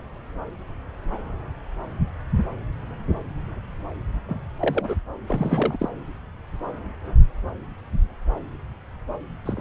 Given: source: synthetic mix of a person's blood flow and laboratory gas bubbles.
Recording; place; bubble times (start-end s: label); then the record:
Doppler ultrasound of blood flow; subclavian vein
4.28-4.40 s: bubbles
4.60-4.95 s: bubbles
5.28-5.89 s: bubbles
9.45-9.61 s: bubbles
From the record:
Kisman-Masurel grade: 222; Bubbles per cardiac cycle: several, 3 to 8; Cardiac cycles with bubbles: 10 to 50%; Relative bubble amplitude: moderate (0.250 to 0.450); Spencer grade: 2 (many but less than half of the cardiac periods contain bubble signals, singularly or in groups); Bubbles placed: anywhere in the cardiac cycle